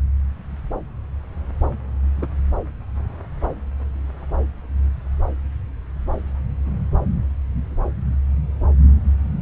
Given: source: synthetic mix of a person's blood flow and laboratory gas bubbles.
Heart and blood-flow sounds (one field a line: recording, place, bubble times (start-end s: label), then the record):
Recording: Doppler ultrasound of blood flow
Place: subclavian vein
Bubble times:
2.21-2.27 s: bubbles
From the record:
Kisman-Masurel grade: 112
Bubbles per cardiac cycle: 1 to 2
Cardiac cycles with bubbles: 1 to 10%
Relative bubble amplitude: moderate (0.250 to 0.450)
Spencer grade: 1 (occasional bubble signal discernible with the cardiac motion signal, with majority of cardiac periods free of bubbles)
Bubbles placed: anywhere in the cardiac cycle